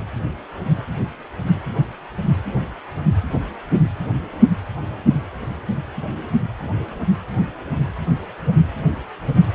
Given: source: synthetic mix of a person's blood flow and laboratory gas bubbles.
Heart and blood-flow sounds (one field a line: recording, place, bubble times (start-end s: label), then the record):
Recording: Doppler ultrasound of blood flow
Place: precordium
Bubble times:
no bubbles
From the record:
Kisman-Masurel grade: 000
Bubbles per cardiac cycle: 0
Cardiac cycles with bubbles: 0%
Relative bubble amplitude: no bubbles discernible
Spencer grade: 0 (complete lack of bubble signals)